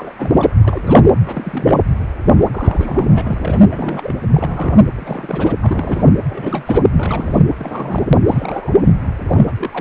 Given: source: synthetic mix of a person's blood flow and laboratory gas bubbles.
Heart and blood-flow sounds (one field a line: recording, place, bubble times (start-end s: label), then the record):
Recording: Doppler ultrasound of blood flow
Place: precordium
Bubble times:
0.00-0.14 s: bubbles
0.18-0.54 s: bubbles
0.64-1.03 s: bubbles
1.22-1.84 s: bubbles
2.40-2.49 s: bubbles
2.52-3.62 s: bubbles
3.71-4.14 s: bubbles
4.33-4.84 s: bubbles
4.95-5.55 s: bubbles
5.61-6.13 s: bubbles
6.29-6.85 s: bubbles
6.96-7.42 s: bubbles
7.58-8.06 s: bubbles
8.27-8.93 s: bubbles
9.28-9.54 s: bubbles
9.57-9.81 s: bubbles
From the record:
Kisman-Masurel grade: 342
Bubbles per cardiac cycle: rolling drumbeat, 9 or more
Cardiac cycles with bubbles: 100%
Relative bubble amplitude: moderate (0.250 to 0.450)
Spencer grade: 3 (all of the cardiac periods contain showers or single bubble signals, but not dominating or overriding the cardiac motion signals)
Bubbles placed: anywhere in the cardiac cycle